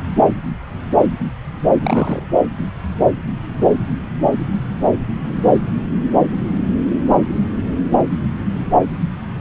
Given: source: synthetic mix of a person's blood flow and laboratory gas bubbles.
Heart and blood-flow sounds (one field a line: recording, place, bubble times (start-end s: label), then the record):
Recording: Doppler ultrasound of blood flow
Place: subclavian vein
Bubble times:
1.81-2.45 s: bubbles
From the record:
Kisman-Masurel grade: 212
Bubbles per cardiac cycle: several, 3 to 8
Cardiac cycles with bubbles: 1 to 10%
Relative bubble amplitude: moderate (0.250 to 0.450)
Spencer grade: 1 (occasional bubble signal discernible with the cardiac motion signal, with majority of cardiac periods free of bubbles)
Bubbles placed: anywhere in the cardiac cycle